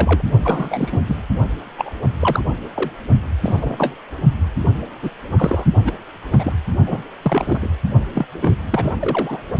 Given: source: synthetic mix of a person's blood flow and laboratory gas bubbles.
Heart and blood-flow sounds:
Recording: Doppler ultrasound of blood flow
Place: precordium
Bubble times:
0.00-0.22 s: bubbles
0.43-1.02 s: bubbles
1.07-1.17 s: bubbles
1.77-1.96 s: bubbles
2.20-2.44 s: bubbles
2.75-2.92 s: bubbles
3.43-3.94 s: bubbles
5.02-5.10 s: bubbles
5.30-5.65 s: bubbles
5.84-5.93 s: bubbles
6.32-6.53 s: bubbles
6.85-7.02 s: bubbles
7.22-7.70 s: bubbles
8.15-8.26 s: bubbles
8.41-8.57 s: bubbles
8.70-8.94 s: bubbles
9.00-9.43 s: bubbles
From the record:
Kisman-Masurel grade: 242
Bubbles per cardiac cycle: several, 3 to 8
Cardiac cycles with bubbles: 100%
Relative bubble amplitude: moderate (0.250 to 0.450)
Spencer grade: 3 (all of the cardiac periods contain showers or single bubble signals, but not dominating or overriding the cardiac motion signals)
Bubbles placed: only in the low amplitude regions of the cardiac cycle

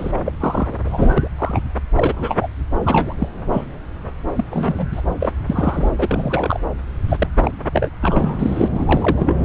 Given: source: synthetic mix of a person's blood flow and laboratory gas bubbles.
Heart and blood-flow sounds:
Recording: Doppler ultrasound of blood flow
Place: subclavian vein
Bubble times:
0.00-0.34 s: bubbles
0.40-0.76 s: bubbles
0.84-1.12 s: bubbles
1.17-1.27 s: bubbles
1.38-1.60 s: bubbles
1.95-2.13 s: bubbles
2.16-2.36 s: bubbles
2.41-2.47 s: bubbles
2.83-3.15 s: bubbles
3.18-3.28 s: bubbles
3.52-3.64 s: bubbles
4.36-4.45 s: bubbles
4.50-4.88 s: bubbles
4.92-5.02 s: bubbles
5.20-5.32 s: bubbles
5.46-5.90 s: bubbles
5.98-6.60 s: bubbles
7.08-7.28 s: bubbles
7.43-7.51 s: bubbles
7.73-7.88 s: bubbles
8.02-8.69 s: bubbles
8.75-9.37 s: bubbles
From the record:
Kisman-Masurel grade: 242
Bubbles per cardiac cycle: several, 3 to 8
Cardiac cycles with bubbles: 100%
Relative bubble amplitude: moderate (0.250 to 0.450)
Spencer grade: 3 (all of the cardiac periods contain showers or single bubble signals, but not dominating or overriding the cardiac motion signals)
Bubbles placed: anywhere in the cardiac cycle

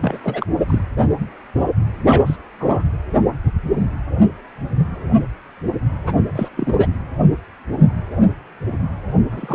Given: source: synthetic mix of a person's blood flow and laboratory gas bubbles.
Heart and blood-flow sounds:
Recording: Doppler ultrasound of blood flow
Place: precordium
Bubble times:
0.00-0.18 s: bubbles
0.23-0.46 s: bubbles
0.68-0.79 s: bubbles
2.06-2.36 s: bubbles
2.60-2.84 s: bubbles
6.06-6.13 s: bubbles
6.36-6.49 s: bubbles
6.57-6.73 s: bubbles
6.78-6.88 s: bubbles
9.31-9.55 s: bubbles
From the record:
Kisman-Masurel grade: 222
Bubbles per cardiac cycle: several, 3 to 8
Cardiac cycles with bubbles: 10 to 50%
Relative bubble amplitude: moderate (0.250 to 0.450)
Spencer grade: 2 (many but less than half of the cardiac periods contain bubble signals, singularly or in groups)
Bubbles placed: anywhere in the cardiac cycle

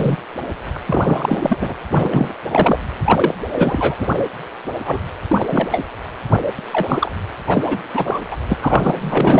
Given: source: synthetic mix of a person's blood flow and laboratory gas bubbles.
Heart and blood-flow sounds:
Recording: Doppler ultrasound of blood flow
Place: precordium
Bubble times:
0.00-0.17 s: bubbles
0.74-0.77 s: bubbles
0.85-1.74 s: bubbles
1.92-2.33 s: bubbles
2.52-2.78 s: bubbles
3.04-3.35 s: bubbles
3.52-3.95 s: bubbles
3.98-4.07 s: bubbles
4.85-4.99 s: bubbles
5.29-5.68 s: bubbles
5.71-5.82 s: bubbles
6.58-7.11 s: bubbles
7.46-7.82 s: bubbles
7.94-8.21 s: bubbles
8.30-8.37 s: bubbles
8.49-8.55 s: bubbles
8.61-9.39 s: bubbles
From the record:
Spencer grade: 3 (all of the cardiac periods contain showers or single bubble signals, but not dominating or overriding the cardiac motion signals)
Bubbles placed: anywhere in the cardiac cycle

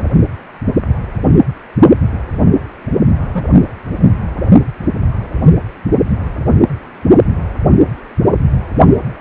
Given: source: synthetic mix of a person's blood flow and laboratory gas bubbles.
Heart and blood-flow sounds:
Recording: Doppler ultrasound of blood flow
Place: precordium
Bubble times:
3.33-3.46 s: bubbles
From the record:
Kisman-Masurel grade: 122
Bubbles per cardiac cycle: 1 to 2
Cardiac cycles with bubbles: 10 to 50%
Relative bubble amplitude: moderate (0.250 to 0.450)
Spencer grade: 2 (many but less than half of the cardiac periods contain bubble signals, singularly or in groups)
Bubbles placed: only in the low amplitude regions of the cardiac cycle

